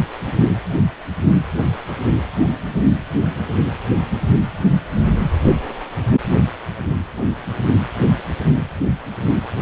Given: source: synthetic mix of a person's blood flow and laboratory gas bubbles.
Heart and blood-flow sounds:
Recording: Doppler ultrasound of blood flow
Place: precordium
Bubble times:
0.27-0.33 s: bubbles
From the record:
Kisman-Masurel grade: 112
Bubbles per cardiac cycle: 1 to 2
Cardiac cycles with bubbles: 1 to 10%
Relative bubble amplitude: moderate (0.250 to 0.450)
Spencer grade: 1 (occasional bubble signal discernible with the cardiac motion signal, with majority of cardiac periods free of bubbles)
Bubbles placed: anywhere in the cardiac cycle

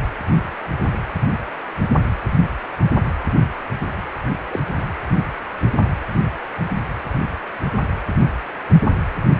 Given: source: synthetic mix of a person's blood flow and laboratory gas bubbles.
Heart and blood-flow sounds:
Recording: Doppler ultrasound of blood flow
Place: precordium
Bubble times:
4.50-4.59 s: bubbles
4.77-4.83 s: bubbles
From the record:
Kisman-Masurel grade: 112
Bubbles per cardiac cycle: 1 to 2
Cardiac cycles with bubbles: 1 to 10%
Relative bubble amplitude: moderate (0.250 to 0.450)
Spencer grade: 1 (occasional bubble signal discernible with the cardiac motion signal, with majority of cardiac periods free of bubbles)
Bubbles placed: anywhere in the cardiac cycle

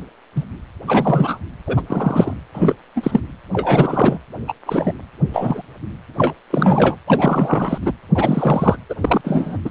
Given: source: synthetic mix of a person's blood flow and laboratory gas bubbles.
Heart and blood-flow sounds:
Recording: Doppler ultrasound of blood flow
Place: precordium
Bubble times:
0.35-0.44 s: bubbles
0.87-1.39 s: bubbles
1.67-1.82 s: bubbles
1.86-2.41 s: bubbles
2.54-2.75 s: bubbles
2.96-3.21 s: bubbles
3.53-4.18 s: bubbles
4.48-4.52 s: bubbles
4.66-4.94 s: bubbles
5.29-5.67 s: bubbles
6.17-6.33 s: bubbles
6.50-6.97 s: bubbles
7.07-7.78 s: bubbles
7.82-7.92 s: bubbles
8.15-8.76 s: bubbles
8.90-8.95 s: bubbles
9.01-9.21 s: bubbles
9.24-9.57 s: bubbles
9.65-9.70 s: bubbles
From the record:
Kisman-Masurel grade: 243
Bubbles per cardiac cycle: several, 3 to 8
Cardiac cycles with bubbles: 100%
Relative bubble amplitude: loud (0.450 to 0.775)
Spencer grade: 3 (all of the cardiac periods contain showers or single bubble signals, but not dominating or overriding the cardiac motion signals)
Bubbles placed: anywhere in the cardiac cycle

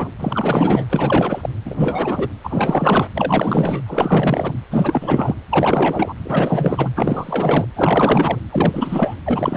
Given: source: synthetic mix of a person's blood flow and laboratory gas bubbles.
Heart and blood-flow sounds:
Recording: Doppler ultrasound of blood flow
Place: precordium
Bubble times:
0.00-0.12 s: bubbles
0.20-0.86 s: bubbles
0.90-1.49 s: bubbles
1.65-2.28 s: bubbles
2.44-3.08 s: bubbles
3.14-3.82 s: bubbles
3.86-4.59 s: bubbles
4.71-5.35 s: bubbles
5.50-6.14 s: bubbles
6.25-6.91 s: bubbles
6.96-7.65 s: bubbles
7.74-8.39 s: bubbles
8.49-9.15 s: bubbles
9.26-9.57 s: bubbles
From the record:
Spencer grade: 4 (maximum detectable bubble signal sounding continuously throughout systole and diastole of every cardiac period, and overriding the amplitude of the normal cardiac signals)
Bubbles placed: anywhere in the cardiac cycle

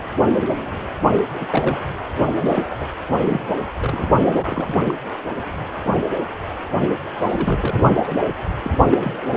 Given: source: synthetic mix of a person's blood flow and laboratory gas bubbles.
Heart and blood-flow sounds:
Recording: Doppler ultrasound of blood flow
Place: precordium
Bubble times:
1.03-1.24 s: bubbles
1.33-1.80 s: bubbles
2.32-2.66 s: bubbles
2.70-2.76 s: bubbles
2.80-2.85 s: bubbles
3.21-3.44 s: bubbles
3.80-4.75 s: bubbles
4.85-4.94 s: bubbles
7.15-7.85 s: bubbles
7.94-8.14 s: bubbles
8.62-9.31 s: bubbles
From the record:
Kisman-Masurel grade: 332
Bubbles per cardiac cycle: rolling drumbeat, 9 or more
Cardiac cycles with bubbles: 50 to 99%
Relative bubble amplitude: moderate (0.250 to 0.450)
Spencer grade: 3 (all of the cardiac periods contain showers or single bubble signals, but not dominating or overriding the cardiac motion signals)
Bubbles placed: anywhere in the cardiac cycle

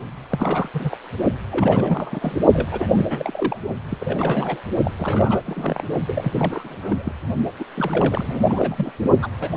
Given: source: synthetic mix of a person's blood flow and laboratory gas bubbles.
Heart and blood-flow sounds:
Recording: Doppler ultrasound of blood flow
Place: precordium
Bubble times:
0.30-0.69 s: bubbles
0.73-0.98 s: bubbles
1.51-2.41 s: bubbles
2.53-2.67 s: bubbles
2.71-3.58 s: bubbles
3.89-4.62 s: bubbles
4.84-4.91 s: bubbles
4.97-5.42 s: bubbles
5.46-5.84 s: bubbles
6.08-7.12 s: bubbles
7.59-7.63 s: bubbles
7.75-8.91 s: bubbles
9.21-9.28 s: bubbles
9.40-9.49 s: bubbles
9.55-9.57 s: bubbles
From the record:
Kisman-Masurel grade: 342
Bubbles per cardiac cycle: rolling drumbeat, 9 or more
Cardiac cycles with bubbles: 100%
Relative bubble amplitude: moderate (0.250 to 0.450)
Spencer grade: 3 (all of the cardiac periods contain showers or single bubble signals, but not dominating or overriding the cardiac motion signals)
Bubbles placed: only in the low amplitude regions of the cardiac cycle

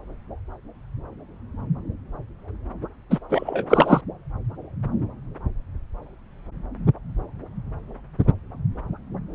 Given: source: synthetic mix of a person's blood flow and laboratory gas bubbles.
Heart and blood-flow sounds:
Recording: Doppler ultrasound of blood flow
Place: subclavian vein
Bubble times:
3.10-3.19 s: bubbles
3.29-3.66 s: bubbles
3.69-4.01 s: bubbles
From the record:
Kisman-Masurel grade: 223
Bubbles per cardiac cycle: several, 3 to 8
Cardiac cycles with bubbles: 10 to 50%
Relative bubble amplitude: loud (0.450 to 0.775)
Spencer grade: 2 (many but less than half of the cardiac periods contain bubble signals, singularly or in groups)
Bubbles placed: anywhere in the cardiac cycle

